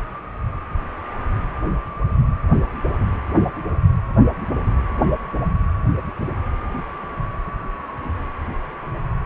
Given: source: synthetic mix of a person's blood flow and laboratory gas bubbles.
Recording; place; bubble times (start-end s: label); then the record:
Doppler ultrasound of blood flow; precordium
no bubbles
From the record:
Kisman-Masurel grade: 000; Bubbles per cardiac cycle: 0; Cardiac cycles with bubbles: 0%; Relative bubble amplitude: no bubbles discernible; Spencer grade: 0 (complete lack of bubble signals)